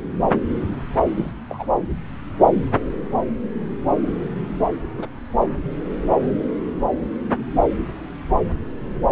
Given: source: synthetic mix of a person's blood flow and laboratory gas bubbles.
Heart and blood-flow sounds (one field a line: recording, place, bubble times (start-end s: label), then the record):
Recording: Doppler ultrasound of blood flow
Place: subclavian vein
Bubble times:
1.08-1.31 s: bubbles
1.50-1.67 s: bubbles
4.97-5.07 s: bubbles
From the record:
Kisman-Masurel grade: 111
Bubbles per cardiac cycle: 1 to 2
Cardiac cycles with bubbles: 1 to 10%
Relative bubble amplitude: barely perceptible (0.100 to 0.250)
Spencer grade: 1 (occasional bubble signal discernible with the cardiac motion signal, with majority of cardiac periods free of bubbles)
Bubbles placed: anywhere in the cardiac cycle